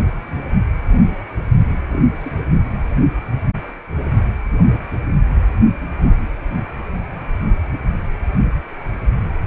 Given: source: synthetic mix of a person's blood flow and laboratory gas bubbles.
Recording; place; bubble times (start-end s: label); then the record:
Doppler ultrasound of blood flow; precordium
1.91-2.02 s: bubbles
2.19-2.32 s: bubbles
From the record:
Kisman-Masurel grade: 111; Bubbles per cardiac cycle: 1 to 2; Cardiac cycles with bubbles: 1 to 10%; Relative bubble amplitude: barely perceptible (0.100 to 0.250); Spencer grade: 1 (occasional bubble signal discernible with the cardiac motion signal, with majority of cardiac periods free of bubbles); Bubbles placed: anywhere in the cardiac cycle